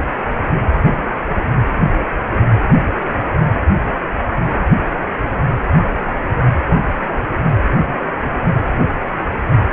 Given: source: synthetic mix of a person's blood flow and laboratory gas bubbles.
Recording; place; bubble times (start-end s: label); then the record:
Doppler ultrasound of blood flow; precordium
no bubbles
From the record:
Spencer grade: 0 (complete lack of bubble signals)